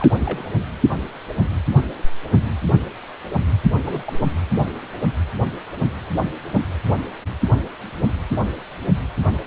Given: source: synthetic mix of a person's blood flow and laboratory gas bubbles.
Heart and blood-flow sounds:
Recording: Doppler ultrasound of blood flow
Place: precordium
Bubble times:
0.00-0.15 s: bubbles
0.19-0.43 s: bubbles
3.79-4.03 s: bubbles
4.06-4.17 s: bubbles
4.23-4.28 s: bubbles
From the record:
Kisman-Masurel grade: 221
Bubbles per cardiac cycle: several, 3 to 8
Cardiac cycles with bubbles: 10 to 50%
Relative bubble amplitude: barely perceptible (0.100 to 0.250)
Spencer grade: 2 (many but less than half of the cardiac periods contain bubble signals, singularly or in groups)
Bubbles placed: anywhere in the cardiac cycle

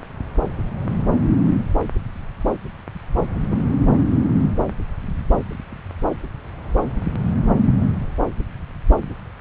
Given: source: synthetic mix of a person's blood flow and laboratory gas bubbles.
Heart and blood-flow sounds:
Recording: Doppler ultrasound of blood flow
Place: subclavian vein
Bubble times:
3.49-3.63 s: bubbles
From the record:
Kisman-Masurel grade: 112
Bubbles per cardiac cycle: 1 to 2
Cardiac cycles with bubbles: 1 to 10%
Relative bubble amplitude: moderate (0.250 to 0.450)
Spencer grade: 1 (occasional bubble signal discernible with the cardiac motion signal, with majority of cardiac periods free of bubbles)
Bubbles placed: anywhere in the cardiac cycle

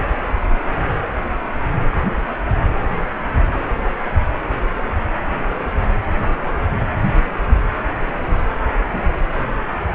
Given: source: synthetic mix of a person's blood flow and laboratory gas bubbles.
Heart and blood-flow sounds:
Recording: Doppler ultrasound of blood flow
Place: precordium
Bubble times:
8.92-9.03 s: bubbles
From the record:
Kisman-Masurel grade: 112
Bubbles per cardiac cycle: 1 to 2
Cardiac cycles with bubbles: 1 to 10%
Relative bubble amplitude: moderate (0.250 to 0.450)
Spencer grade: 1 (occasional bubble signal discernible with the cardiac motion signal, with majority of cardiac periods free of bubbles)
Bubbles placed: anywhere in the cardiac cycle

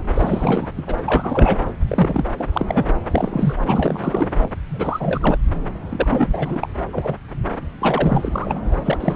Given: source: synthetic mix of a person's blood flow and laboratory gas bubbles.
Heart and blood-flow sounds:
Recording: Doppler ultrasound of blood flow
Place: subclavian vein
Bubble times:
0.15-0.67 s: bubbles
0.77-0.83 s: bubbles
0.86-0.95 s: bubbles
1.04-1.65 s: bubbles
1.88-2.25 s: bubbles
2.38-2.49 s: bubbles
2.52-2.86 s: bubbles
3.10-3.99 s: bubbles
4.04-4.29 s: bubbles
4.39-4.50 s: bubbles
4.70-5.38 s: bubbles
5.89-6.69 s: bubbles
6.91-7.16 s: bubbles
7.81-8.59 s: bubbles
8.70-8.76 s: bubbles
8.82-9.16 s: bubbles
From the record:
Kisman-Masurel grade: 343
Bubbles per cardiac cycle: rolling drumbeat, 9 or more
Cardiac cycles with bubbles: 100%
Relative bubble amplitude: loud (0.450 to 0.775)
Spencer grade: 3 (all of the cardiac periods contain showers or single bubble signals, but not dominating or overriding the cardiac motion signals)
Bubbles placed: anywhere in the cardiac cycle

